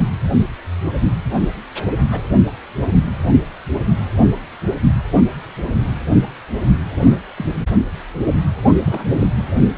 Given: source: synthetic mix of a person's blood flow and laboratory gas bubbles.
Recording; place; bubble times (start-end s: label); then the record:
Doppler ultrasound of blood flow; precordium
2.12-2.22 s: bubbles
6.99-7.21 s: bubbles
7.38-7.46 s: bubbles
8.86-9.04 s: bubbles
9.19-9.27 s: bubbles
From the record:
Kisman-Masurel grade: 121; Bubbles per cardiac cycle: 1 to 2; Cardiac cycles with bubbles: 10 to 50%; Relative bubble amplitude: barely perceptible (0.100 to 0.250); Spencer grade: 2 (many but less than half of the cardiac periods contain bubble signals, singularly or in groups); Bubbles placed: only in the low amplitude regions of the cardiac cycle